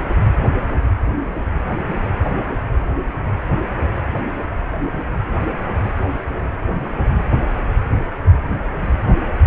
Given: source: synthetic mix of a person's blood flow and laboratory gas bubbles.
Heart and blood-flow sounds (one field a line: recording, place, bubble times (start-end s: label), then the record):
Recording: Doppler ultrasound of blood flow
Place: precordium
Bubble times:
no bubbles
From the record:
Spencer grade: 0 (complete lack of bubble signals)